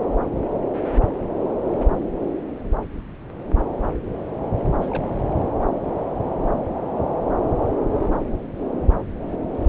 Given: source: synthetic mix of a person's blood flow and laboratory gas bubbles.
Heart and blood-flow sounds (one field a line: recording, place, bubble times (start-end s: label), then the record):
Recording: Doppler ultrasound of blood flow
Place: subclavian vein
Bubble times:
4.75-5.16 s: bubbles
5.18-5.25 s: bubbles
From the record:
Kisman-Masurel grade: 211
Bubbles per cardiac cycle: several, 3 to 8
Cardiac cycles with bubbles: 1 to 10%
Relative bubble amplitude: barely perceptible (0.100 to 0.250)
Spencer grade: 1 (occasional bubble signal discernible with the cardiac motion signal, with majority of cardiac periods free of bubbles)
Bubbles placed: anywhere in the cardiac cycle